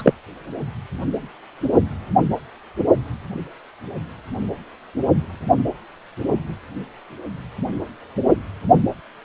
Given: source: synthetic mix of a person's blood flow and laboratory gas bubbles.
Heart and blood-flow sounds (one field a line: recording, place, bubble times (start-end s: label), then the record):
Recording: Doppler ultrasound of blood flow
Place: precordium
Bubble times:
0.00-0.13 s: bubbles
From the record:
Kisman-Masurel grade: 113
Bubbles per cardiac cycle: 1 to 2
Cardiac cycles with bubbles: 1 to 10%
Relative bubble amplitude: loud (0.450 to 0.775)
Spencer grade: 1 (occasional bubble signal discernible with the cardiac motion signal, with majority of cardiac periods free of bubbles)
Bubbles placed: only in the low amplitude regions of the cardiac cycle